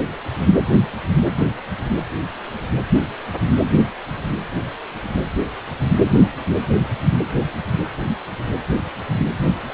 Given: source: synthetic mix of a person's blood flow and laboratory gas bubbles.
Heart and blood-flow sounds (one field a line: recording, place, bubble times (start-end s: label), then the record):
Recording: Doppler ultrasound of blood flow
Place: precordium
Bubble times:
no bubbles
From the record:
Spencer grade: 0 (complete lack of bubble signals)